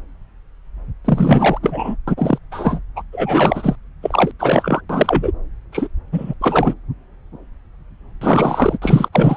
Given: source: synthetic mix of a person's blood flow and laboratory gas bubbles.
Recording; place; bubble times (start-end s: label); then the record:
Doppler ultrasound of blood flow; subclavian vein
1.04-1.58 s: bubbles
1.62-1.96 s: bubbles
2.07-2.38 s: bubbles
2.51-2.79 s: bubbles
2.96-3.03 s: bubbles
3.12-3.76 s: bubbles
4.03-4.32 s: bubbles
4.39-4.82 s: bubbles
4.89-5.32 s: bubbles
5.72-5.88 s: bubbles
6.12-6.34 s: bubbles
6.41-6.74 s: bubbles
8.21-8.79 s: bubbles
8.81-9.09 s: bubbles
9.12-9.37 s: bubbles
From the record:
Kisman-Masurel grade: 333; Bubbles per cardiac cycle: rolling drumbeat, 9 or more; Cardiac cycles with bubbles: 50 to 99%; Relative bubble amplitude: loud (0.450 to 0.775); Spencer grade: 3 (all of the cardiac periods contain showers or single bubble signals, but not dominating or overriding the cardiac motion signals); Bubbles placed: anywhere in the cardiac cycle